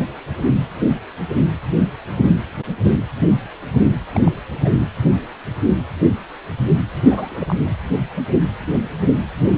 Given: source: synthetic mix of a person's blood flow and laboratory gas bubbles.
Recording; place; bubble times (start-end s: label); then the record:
Doppler ultrasound of blood flow; precordium
4.14-4.20 s: bubbles
4.25-4.31 s: bubbles
4.64-4.69 s: bubbles
6.96-7.56 s: bubbles
From the record:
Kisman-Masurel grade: 221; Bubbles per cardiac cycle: several, 3 to 8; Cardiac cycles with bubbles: 10 to 50%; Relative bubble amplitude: barely perceptible (0.100 to 0.250); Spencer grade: 2 (many but less than half of the cardiac periods contain bubble signals, singularly or in groups); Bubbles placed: anywhere in the cardiac cycle